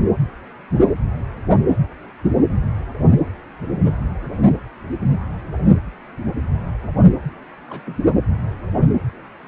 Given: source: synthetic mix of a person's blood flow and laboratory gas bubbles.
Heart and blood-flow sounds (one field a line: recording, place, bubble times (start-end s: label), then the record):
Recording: Doppler ultrasound of blood flow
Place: precordium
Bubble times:
7.68-7.80 s: bubbles
7.86-7.97 s: bubbles
From the record:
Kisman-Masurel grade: 111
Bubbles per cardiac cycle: 1 to 2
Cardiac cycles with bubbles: 1 to 10%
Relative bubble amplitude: barely perceptible (0.100 to 0.250)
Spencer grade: 1 (occasional bubble signal discernible with the cardiac motion signal, with majority of cardiac periods free of bubbles)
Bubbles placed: anywhere in the cardiac cycle